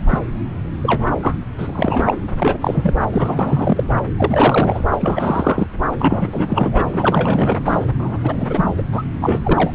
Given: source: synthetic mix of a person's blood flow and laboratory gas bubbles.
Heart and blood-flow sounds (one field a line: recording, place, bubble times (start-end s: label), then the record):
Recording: Doppler ultrasound of blood flow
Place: subclavian vein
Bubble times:
0.08-0.19 s: bubbles
0.82-1.07 s: bubbles
1.22-1.35 s: bubbles
1.57-2.14 s: bubbles
2.39-2.95 s: bubbles
3.12-3.83 s: bubbles
4.17-4.83 s: bubbles
4.92-5.67 s: bubbles
5.99-6.85 s: bubbles
6.91-7.85 s: bubbles
7.98-8.17 s: bubbles
8.23-8.66 s: bubbles
8.78-8.82 s: bubbles
8.92-9.02 s: bubbles
9.21-9.39 s: bubbles
9.43-9.71 s: bubbles
From the record:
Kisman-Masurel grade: 343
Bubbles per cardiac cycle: rolling drumbeat, 9 or more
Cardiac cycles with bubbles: 100%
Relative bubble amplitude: loud (0.450 to 0.775)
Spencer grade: 3 (all of the cardiac periods contain showers or single bubble signals, but not dominating or overriding the cardiac motion signals)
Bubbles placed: anywhere in the cardiac cycle